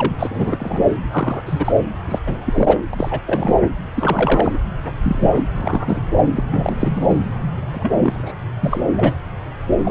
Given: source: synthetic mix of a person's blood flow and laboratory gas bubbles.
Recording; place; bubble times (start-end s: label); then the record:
Doppler ultrasound of blood flow; subclavian vein
0.00-0.12 s: bubbles
0.19-0.86 s: bubbles
0.90-0.95 s: bubbles
1.10-1.42 s: bubbles
1.46-1.72 s: bubbles
2.07-2.19 s: bubbles
2.26-2.41 s: bubbles
2.46-2.77 s: bubbles
2.93-3.21 s: bubbles
3.26-3.56 s: bubbles
3.94-4.58 s: bubbles
5.03-5.29 s: bubbles
5.32-5.46 s: bubbles
5.54-6.02 s: bubbles
6.15-6.21 s: bubbles
6.34-6.43 s: bubbles
6.50-6.77 s: bubbles
6.79-6.91 s: bubbles
6.96-7.18 s: bubbles
7.71-8.35 s: bubbles
8.61-8.80 s: bubbles
8.96-9.14 s: bubbles
9.85-9.91 s: bubbles
From the record:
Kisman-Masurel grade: 232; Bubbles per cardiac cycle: several, 3 to 8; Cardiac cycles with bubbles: 50 to 99%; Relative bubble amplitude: moderate (0.250 to 0.450); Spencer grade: 3 (all of the cardiac periods contain showers or single bubble signals, but not dominating or overriding the cardiac motion signals); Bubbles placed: anywhere in the cardiac cycle